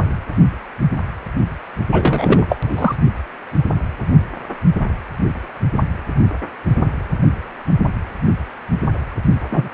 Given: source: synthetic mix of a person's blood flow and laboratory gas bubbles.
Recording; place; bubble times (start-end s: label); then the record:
Doppler ultrasound of blood flow; precordium
1.92-2.95 s: bubbles
9.49-9.69 s: bubbles
From the record:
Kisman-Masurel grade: 223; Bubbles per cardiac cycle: several, 3 to 8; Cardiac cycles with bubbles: 10 to 50%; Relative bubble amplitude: loud (0.450 to 0.775); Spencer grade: 2 (many but less than half of the cardiac periods contain bubble signals, singularly or in groups); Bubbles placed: only in the low amplitude regions of the cardiac cycle